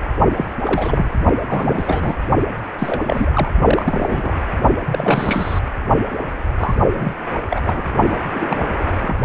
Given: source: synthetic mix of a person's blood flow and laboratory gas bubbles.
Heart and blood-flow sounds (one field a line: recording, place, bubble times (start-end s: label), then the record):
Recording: Doppler ultrasound of blood flow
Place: precordium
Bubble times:
0.37-0.48 s: bubbles
0.65-1.10 s: bubbles
1.46-2.15 s: bubbles
2.79-3.02 s: bubbles
3.04-3.48 s: bubbles
3.65-4.32 s: bubbles
4.88-5.59 s: bubbles
6.10-6.17 s: bubbles
6.57-6.74 s: bubbles
6.93-7.15 s: bubbles
7.50-7.61 s: bubbles
7.65-7.83 s: bubbles
8.10-8.21 s: bubbles
8.32-8.66 s: bubbles
8.79-8.96 s: bubbles
9.01-9.16 s: bubbles
From the record:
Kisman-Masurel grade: 332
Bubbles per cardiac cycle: rolling drumbeat, 9 or more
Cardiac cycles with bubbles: 50 to 99%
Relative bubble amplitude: moderate (0.250 to 0.450)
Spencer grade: 3 (all of the cardiac periods contain showers or single bubble signals, but not dominating or overriding the cardiac motion signals)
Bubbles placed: only in the low amplitude regions of the cardiac cycle